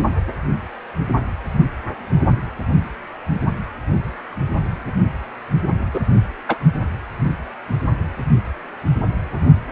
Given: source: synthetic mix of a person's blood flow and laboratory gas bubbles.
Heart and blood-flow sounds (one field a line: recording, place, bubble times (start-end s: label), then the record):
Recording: Doppler ultrasound of blood flow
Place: precordium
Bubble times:
5.94-6.01 s: bubbles
6.48-6.57 s: bubbles
From the record:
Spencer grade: 1 (occasional bubble signal discernible with the cardiac motion signal, with majority of cardiac periods free of bubbles)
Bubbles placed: anywhere in the cardiac cycle